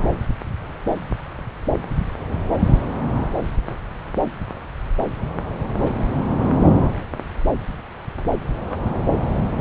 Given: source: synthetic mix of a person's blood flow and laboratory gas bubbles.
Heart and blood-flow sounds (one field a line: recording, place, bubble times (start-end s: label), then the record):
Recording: Doppler ultrasound of blood flow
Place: subclavian vein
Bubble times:
5.78-5.81 s: bubbles
5.84-5.91 s: bubbles
6.75-6.88 s: bubbles
From the record:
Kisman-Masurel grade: 121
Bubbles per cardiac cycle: 1 to 2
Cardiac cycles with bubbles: 10 to 50%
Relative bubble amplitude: barely perceptible (0.100 to 0.250)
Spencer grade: 2 (many but less than half of the cardiac periods contain bubble signals, singularly or in groups)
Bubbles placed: anywhere in the cardiac cycle